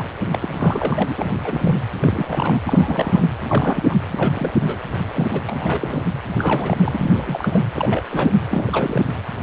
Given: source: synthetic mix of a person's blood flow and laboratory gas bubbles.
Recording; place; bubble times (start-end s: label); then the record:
Doppler ultrasound of blood flow; precordium
0.00-0.06 s: bubbles
0.33-0.39 s: bubbles
0.41-0.54 s: bubbles
0.59-1.14 s: bubbles
1.17-1.36 s: bubbles
1.43-1.79 s: bubbles
2.02-2.60 s: bubbles
2.65-3.29 s: bubbles
3.40-3.95 s: bubbles
4.08-4.53 s: bubbles
4.60-4.79 s: bubbles
5.13-5.29 s: bubbles
5.33-5.41 s: bubbles
5.46-6.04 s: bubbles
6.38-6.77 s: bubbles
6.83-7.60 s: bubbles
7.76-8.04 s: bubbles
8.10-8.32 s: bubbles
8.51-9.04 s: bubbles
From the record:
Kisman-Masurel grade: 342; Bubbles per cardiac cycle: rolling drumbeat, 9 or more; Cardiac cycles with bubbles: 100%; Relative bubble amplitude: moderate (0.250 to 0.450); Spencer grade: 3 (all of the cardiac periods contain showers or single bubble signals, but not dominating or overriding the cardiac motion signals); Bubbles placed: anywhere in the cardiac cycle